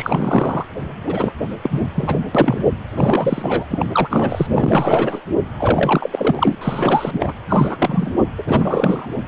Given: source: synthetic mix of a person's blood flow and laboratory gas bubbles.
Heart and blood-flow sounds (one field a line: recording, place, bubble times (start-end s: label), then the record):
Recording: Doppler ultrasound of blood flow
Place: precordium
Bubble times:
0.00-0.65 s: bubbles
1.06-1.32 s: bubbles
1.62-1.81 s: bubbles
1.95-2.17 s: bubbles
2.35-2.70 s: bubbles
2.92-3.66 s: bubbles
3.69-3.85 s: bubbles
3.92-4.47 s: bubbles
4.51-5.22 s: bubbles
5.59-6.55 s: bubbles
6.61-7.33 s: bubbles
7.48-8.11 s: bubbles
8.38-8.44 s: bubbles
8.46-9.09 s: bubbles
From the record:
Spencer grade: 3 (all of the cardiac periods contain showers or single bubble signals, but not dominating or overriding the cardiac motion signals)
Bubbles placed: anywhere in the cardiac cycle